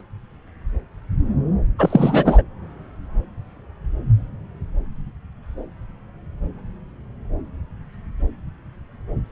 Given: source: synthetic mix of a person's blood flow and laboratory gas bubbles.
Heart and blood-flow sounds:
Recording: Doppler ultrasound of blood flow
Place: subclavian vein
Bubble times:
1.79-2.42 s: bubbles
From the record:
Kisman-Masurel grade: 213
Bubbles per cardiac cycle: several, 3 to 8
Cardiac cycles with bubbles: 1 to 10%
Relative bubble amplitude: loud (0.450 to 0.775)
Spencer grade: 1 (occasional bubble signal discernible with the cardiac motion signal, with majority of cardiac periods free of bubbles)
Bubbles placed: anywhere in the cardiac cycle

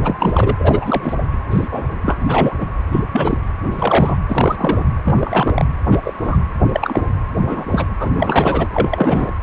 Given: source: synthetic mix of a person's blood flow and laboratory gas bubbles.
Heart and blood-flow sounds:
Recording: Doppler ultrasound of blood flow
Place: precordium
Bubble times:
0.04-0.15 s: bubbles
0.19-1.16 s: bubbles
1.50-1.68 s: bubbles
1.71-1.85 s: bubbles
2.02-2.18 s: bubbles
2.27-2.54 s: bubbles
2.60-2.67 s: bubbles
2.92-3.00 s: bubbles
3.11-3.38 s: bubbles
3.73-4.26 s: bubbles
4.29-4.83 s: bubbles
5.04-5.65 s: bubbles
5.91-5.99 s: bubbles
6.04-6.13 s: bubbles
6.24-6.37 s: bubbles
6.72-7.02 s: bubbles
7.37-7.86 s: bubbles
7.99-8.68 s: bubbles
8.72-9.35 s: bubbles
From the record:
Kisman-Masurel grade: 243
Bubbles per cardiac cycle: several, 3 to 8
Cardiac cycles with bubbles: 100%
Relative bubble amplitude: loud (0.450 to 0.775)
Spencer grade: 3 (all of the cardiac periods contain showers or single bubble signals, but not dominating or overriding the cardiac motion signals)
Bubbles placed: anywhere in the cardiac cycle

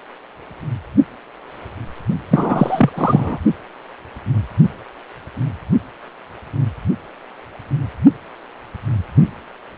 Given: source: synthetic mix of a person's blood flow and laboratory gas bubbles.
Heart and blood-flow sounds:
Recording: Doppler ultrasound of blood flow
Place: precordium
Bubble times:
2.31-2.90 s: bubbles
2.94-3.38 s: bubbles
From the record:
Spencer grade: 1 (occasional bubble signal discernible with the cardiac motion signal, with majority of cardiac periods free of bubbles)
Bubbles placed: only in the low amplitude regions of the cardiac cycle

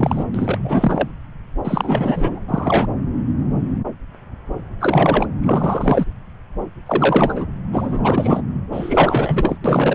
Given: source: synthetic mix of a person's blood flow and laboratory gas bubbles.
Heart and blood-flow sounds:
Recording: Doppler ultrasound of blood flow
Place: subclavian vein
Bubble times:
0.00-0.25 s: bubbles
0.34-1.08 s: bubbles
1.64-2.40 s: bubbles
2.48-2.86 s: bubbles
4.80-5.27 s: bubbles
5.43-6.05 s: bubbles
6.86-7.46 s: bubbles
7.72-8.41 s: bubbles
8.71-9.58 s: bubbles
9.64-9.95 s: bubbles
From the record:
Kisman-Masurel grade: 333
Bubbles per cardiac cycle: rolling drumbeat, 9 or more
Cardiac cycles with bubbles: 50 to 99%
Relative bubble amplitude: loud (0.450 to 0.775)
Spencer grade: 3 (all of the cardiac periods contain showers or single bubble signals, but not dominating or overriding the cardiac motion signals)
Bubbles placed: anywhere in the cardiac cycle

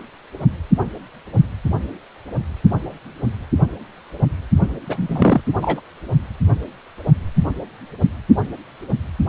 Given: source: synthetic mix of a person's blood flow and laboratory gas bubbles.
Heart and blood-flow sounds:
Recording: Doppler ultrasound of blood flow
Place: precordium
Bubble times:
4.86-5.41 s: bubbles
5.61-5.80 s: bubbles
From the record:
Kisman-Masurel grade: 213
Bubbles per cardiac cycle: several, 3 to 8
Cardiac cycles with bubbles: 1 to 10%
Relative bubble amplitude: loud (0.450 to 0.775)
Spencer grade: 1 (occasional bubble signal discernible with the cardiac motion signal, with majority of cardiac periods free of bubbles)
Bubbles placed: only in the low amplitude regions of the cardiac cycle

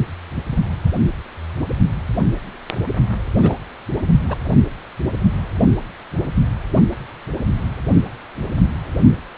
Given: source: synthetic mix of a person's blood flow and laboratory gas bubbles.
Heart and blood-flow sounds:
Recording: Doppler ultrasound of blood flow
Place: precordium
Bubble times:
3.34-3.54 s: bubbles
4.29-4.35 s: bubbles
From the record:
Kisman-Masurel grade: 212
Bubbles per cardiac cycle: several, 3 to 8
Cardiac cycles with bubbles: 1 to 10%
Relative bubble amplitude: moderate (0.250 to 0.450)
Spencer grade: 1 (occasional bubble signal discernible with the cardiac motion signal, with majority of cardiac periods free of bubbles)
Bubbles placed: anywhere in the cardiac cycle

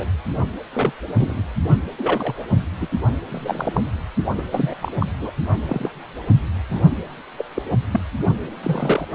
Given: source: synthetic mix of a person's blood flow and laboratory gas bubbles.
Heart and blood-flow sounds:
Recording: Doppler ultrasound of blood flow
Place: precordium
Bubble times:
0.00-0.07 s: bubbles
0.73-0.93 s: bubbles
1.18-1.42 s: bubbles
1.98-2.45 s: bubbles
2.81-2.89 s: bubbles
3.29-3.81 s: bubbles
4.38-4.43 s: bubbles
4.51-4.74 s: bubbles
4.82-5.06 s: bubbles
5.19-5.31 s: bubbles
5.69-5.90 s: bubbles
6.69-6.80 s: bubbles
7.38-7.45 s: bubbles
7.54-7.62 s: bubbles
7.91-8.00 s: bubbles
8.62-9.05 s: bubbles
From the record:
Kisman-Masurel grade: 242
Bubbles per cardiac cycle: several, 3 to 8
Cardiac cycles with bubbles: 100%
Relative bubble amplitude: moderate (0.250 to 0.450)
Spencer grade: 3 (all of the cardiac periods contain showers or single bubble signals, but not dominating or overriding the cardiac motion signals)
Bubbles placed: only in the low amplitude regions of the cardiac cycle

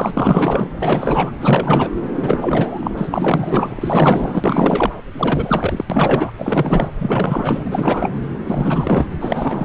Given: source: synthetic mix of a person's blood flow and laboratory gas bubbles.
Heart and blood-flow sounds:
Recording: Doppler ultrasound of blood flow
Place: subclavian vein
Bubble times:
0.00-0.11 s: bubbles
0.13-0.70 s: bubbles
0.81-1.32 s: bubbles
1.40-1.91 s: bubbles
2.21-4.92 s: bubbles
5.12-5.84 s: bubbles
5.89-6.31 s: bubbles
6.38-6.88 s: bubbles
7.00-8.11 s: bubbles
8.46-9.06 s: bubbles
9.20-9.65 s: bubbles
From the record:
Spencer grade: 4 (maximum detectable bubble signal sounding continuously throughout systole and diastole of every cardiac period, and overriding the amplitude of the normal cardiac signals)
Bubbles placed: anywhere in the cardiac cycle

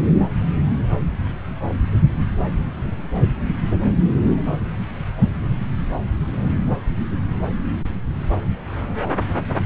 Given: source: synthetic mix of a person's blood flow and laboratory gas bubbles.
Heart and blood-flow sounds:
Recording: Doppler ultrasound of blood flow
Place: subclavian vein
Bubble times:
no bubbles
From the record:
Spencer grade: 0 (complete lack of bubble signals)

